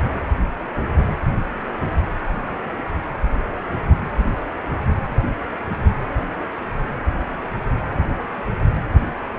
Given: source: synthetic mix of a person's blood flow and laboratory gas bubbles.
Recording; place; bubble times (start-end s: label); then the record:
Doppler ultrasound of blood flow; precordium
no bubbles
From the record:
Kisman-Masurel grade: 000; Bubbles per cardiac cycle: 0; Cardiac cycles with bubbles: 0%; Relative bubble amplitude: no bubbles discernible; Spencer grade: 0 (complete lack of bubble signals)